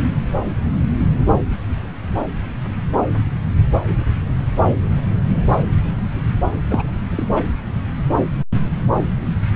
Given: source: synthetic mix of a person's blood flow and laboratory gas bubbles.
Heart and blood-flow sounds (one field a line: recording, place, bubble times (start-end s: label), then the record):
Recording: Doppler ultrasound of blood flow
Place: subclavian vein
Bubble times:
6.70-6.83 s: bubbles
7.11-7.27 s: bubbles
7.30-7.46 s: bubbles
From the record:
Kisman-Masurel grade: 212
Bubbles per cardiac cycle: several, 3 to 8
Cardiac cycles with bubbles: 1 to 10%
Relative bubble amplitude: moderate (0.250 to 0.450)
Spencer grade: 1 (occasional bubble signal discernible with the cardiac motion signal, with majority of cardiac periods free of bubbles)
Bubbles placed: anywhere in the cardiac cycle